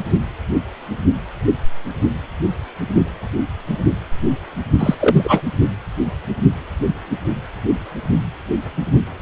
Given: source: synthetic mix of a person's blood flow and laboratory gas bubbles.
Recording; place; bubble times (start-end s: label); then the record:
Doppler ultrasound of blood flow; precordium
4.79-5.41 s: bubbles
From the record:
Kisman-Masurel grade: 213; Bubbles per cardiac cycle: several, 3 to 8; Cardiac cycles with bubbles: 1 to 10%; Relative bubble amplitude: loud (0.450 to 0.775); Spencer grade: 1 (occasional bubble signal discernible with the cardiac motion signal, with majority of cardiac periods free of bubbles); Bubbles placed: only in the low amplitude regions of the cardiac cycle